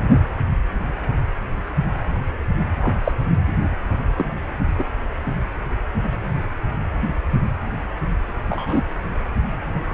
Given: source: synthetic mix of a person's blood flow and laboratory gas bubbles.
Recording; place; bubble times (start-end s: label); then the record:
Doppler ultrasound of blood flow; precordium
2.81-2.99 s: bubbles
3.04-3.12 s: bubbles
4.16-4.25 s: bubbles
4.77-4.85 s: bubbles
8.48-8.83 s: bubbles
9.91-9.94 s: bubbles
From the record:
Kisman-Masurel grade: 123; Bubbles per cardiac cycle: 1 to 2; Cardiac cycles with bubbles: 10 to 50%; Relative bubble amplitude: loud (0.450 to 0.775); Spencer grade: 2 (many but less than half of the cardiac periods contain bubble signals, singularly or in groups); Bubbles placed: anywhere in the cardiac cycle